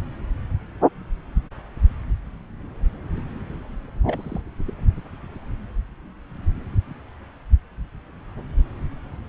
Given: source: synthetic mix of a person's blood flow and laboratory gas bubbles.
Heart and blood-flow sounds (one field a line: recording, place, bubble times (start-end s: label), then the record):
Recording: Doppler ultrasound of blood flow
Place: subclavian vein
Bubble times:
4.06-4.42 s: bubbles
4.67-4.74 s: bubbles
From the record:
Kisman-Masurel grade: 211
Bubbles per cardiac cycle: several, 3 to 8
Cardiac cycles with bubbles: 1 to 10%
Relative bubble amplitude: barely perceptible (0.100 to 0.250)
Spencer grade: 1 (occasional bubble signal discernible with the cardiac motion signal, with majority of cardiac periods free of bubbles)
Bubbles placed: anywhere in the cardiac cycle